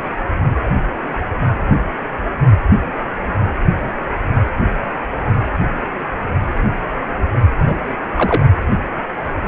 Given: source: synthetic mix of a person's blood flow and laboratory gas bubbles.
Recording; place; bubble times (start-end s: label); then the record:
Doppler ultrasound of blood flow; precordium
7.66-7.78 s: bubbles
8.16-8.46 s: bubbles
From the record:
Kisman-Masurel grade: 113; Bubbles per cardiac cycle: 1 to 2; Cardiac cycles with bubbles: 1 to 10%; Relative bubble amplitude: loud (0.450 to 0.775); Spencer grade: 1 (occasional bubble signal discernible with the cardiac motion signal, with majority of cardiac periods free of bubbles); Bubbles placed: anywhere in the cardiac cycle